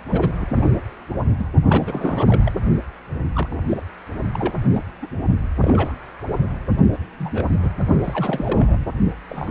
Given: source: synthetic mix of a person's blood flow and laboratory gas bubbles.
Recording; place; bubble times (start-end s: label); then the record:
Doppler ultrasound of blood flow; precordium
0.11-0.29 s: bubbles
0.40-0.46 s: bubbles
0.49-0.67 s: bubbles
1.39-1.46 s: bubbles
1.68-2.53 s: bubbles
3.33-3.48 s: bubbles
3.51-3.56 s: bubbles
3.68-3.83 s: bubbles
4.34-4.54 s: bubbles
4.73-4.83 s: bubbles
5.02-5.07 s: bubbles
5.61-5.92 s: bubbles
6.92-6.97 s: bubbles
7.18-7.58 s: bubbles
7.62-7.70 s: bubbles
8.04-8.86 s: bubbles
9.29-9.51 s: bubbles
From the record:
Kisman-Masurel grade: 242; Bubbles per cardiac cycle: several, 3 to 8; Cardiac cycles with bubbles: 100%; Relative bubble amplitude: moderate (0.250 to 0.450); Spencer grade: 3 (all of the cardiac periods contain showers or single bubble signals, but not dominating or overriding the cardiac motion signals); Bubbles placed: only in the low amplitude regions of the cardiac cycle